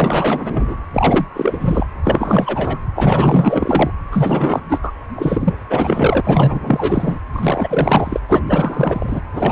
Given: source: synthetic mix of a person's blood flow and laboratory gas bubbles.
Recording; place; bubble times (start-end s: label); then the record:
Doppler ultrasound of blood flow; precordium
0.00-0.76 s: bubbles
0.93-1.26 s: bubbles
1.33-1.86 s: bubbles
2.03-2.78 s: bubbles
2.95-3.90 s: bubbles
4.12-4.60 s: bubbles
4.68-4.80 s: bubbles
4.83-4.92 s: bubbles
5.15-5.52 s: bubbles
5.69-6.21 s: bubbles
6.23-7.19 s: bubbles
7.33-8.20 s: bubbles
8.29-8.40 s: bubbles
8.47-9.21 s: bubbles
9.32-9.52 s: bubbles
From the record:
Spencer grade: 4 (maximum detectable bubble signal sounding continuously throughout systole and diastole of every cardiac period, and overriding the amplitude of the normal cardiac signals); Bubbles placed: anywhere in the cardiac cycle